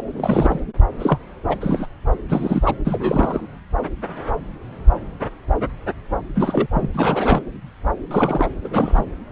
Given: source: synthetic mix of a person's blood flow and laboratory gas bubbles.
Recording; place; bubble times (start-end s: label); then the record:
Doppler ultrasound of blood flow; subclavian vein
0.16-0.59 s: bubbles
0.99-1.19 s: bubbles
1.49-1.57 s: bubbles
1.60-1.86 s: bubbles
2.29-2.75 s: bubbles
2.84-3.41 s: bubbles
6.35-6.67 s: bubbles
6.74-6.89 s: bubbles
6.94-7.42 s: bubbles
8.11-8.50 s: bubbles
8.63-9.05 s: bubbles
From the record:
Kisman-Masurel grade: 232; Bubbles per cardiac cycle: several, 3 to 8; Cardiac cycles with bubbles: 50 to 99%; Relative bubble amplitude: moderate (0.250 to 0.450); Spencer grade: 3 (all of the cardiac periods contain showers or single bubble signals, but not dominating or overriding the cardiac motion signals); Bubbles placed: anywhere in the cardiac cycle